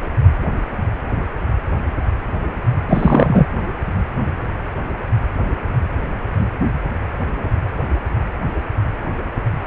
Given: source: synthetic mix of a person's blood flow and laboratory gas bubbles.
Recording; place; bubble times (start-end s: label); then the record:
Doppler ultrasound of blood flow; precordium
2.88-3.46 s: bubbles
From the record:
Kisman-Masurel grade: 223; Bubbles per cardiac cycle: several, 3 to 8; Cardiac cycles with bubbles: 10 to 50%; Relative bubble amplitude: loud (0.450 to 0.775); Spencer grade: 2 (many but less than half of the cardiac periods contain bubble signals, singularly or in groups); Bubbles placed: anywhere in the cardiac cycle